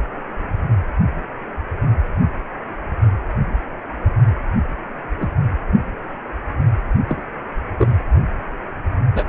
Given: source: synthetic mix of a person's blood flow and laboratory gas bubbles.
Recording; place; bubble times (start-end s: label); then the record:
Doppler ultrasound of blood flow; precordium
5.20-5.27 s: bubbles
7.08-7.23 s: bubbles
7.78-7.94 s: bubbles
9.14-9.25 s: bubbles
From the record:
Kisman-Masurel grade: 122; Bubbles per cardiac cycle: 1 to 2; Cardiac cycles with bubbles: 10 to 50%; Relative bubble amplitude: moderate (0.250 to 0.450); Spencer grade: 2 (many but less than half of the cardiac periods contain bubble signals, singularly or in groups); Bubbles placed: only in the low amplitude regions of the cardiac cycle